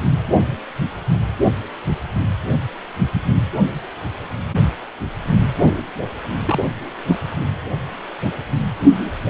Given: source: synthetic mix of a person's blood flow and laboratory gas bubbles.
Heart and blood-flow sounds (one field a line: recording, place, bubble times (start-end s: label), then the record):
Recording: Doppler ultrasound of blood flow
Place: precordium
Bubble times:
6.45-6.65 s: bubbles
7.07-7.17 s: bubbles
From the record:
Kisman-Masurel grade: 112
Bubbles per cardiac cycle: 1 to 2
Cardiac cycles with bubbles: 1 to 10%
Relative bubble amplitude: moderate (0.250 to 0.450)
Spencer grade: 1 (occasional bubble signal discernible with the cardiac motion signal, with majority of cardiac periods free of bubbles)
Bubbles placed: anywhere in the cardiac cycle